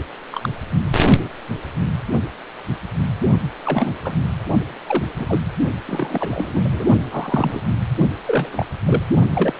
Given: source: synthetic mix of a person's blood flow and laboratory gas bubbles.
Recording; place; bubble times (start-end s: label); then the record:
Doppler ultrasound of blood flow; precordium
0.32-0.49 s: bubbles
3.64-3.92 s: bubbles
4.04-4.14 s: bubbles
4.86-5.03 s: bubbles
5.16-5.25 s: bubbles
5.28-5.40 s: bubbles
5.86-6.85 s: bubbles
7.10-7.61 s: bubbles
8.26-8.67 s: bubbles
8.85-9.03 s: bubbles
9.33-9.54 s: bubbles
From the record:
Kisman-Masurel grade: 232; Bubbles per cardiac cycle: several, 3 to 8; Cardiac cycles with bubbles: 50 to 99%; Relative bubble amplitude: moderate (0.250 to 0.450); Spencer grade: 3 (all of the cardiac periods contain showers or single bubble signals, but not dominating or overriding the cardiac motion signals); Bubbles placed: only in the low amplitude regions of the cardiac cycle